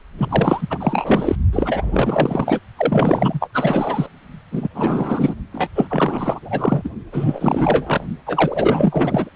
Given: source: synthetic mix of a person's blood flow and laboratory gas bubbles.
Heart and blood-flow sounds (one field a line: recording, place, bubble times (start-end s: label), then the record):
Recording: Doppler ultrasound of blood flow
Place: precordium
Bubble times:
0.17-1.35 s: bubbles
1.53-2.61 s: bubbles
2.77-3.50 s: bubbles
3.53-4.08 s: bubbles
4.51-4.68 s: bubbles
4.74-5.34 s: bubbles
5.52-5.68 s: bubbles
5.74-6.39 s: bubbles
6.42-6.90 s: bubbles
7.11-8.04 s: bubbles
8.26-9.29 s: bubbles
From the record:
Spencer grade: 4 (maximum detectable bubble signal sounding continuously throughout systole and diastole of every cardiac period, and overriding the amplitude of the normal cardiac signals)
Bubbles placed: only in the low amplitude regions of the cardiac cycle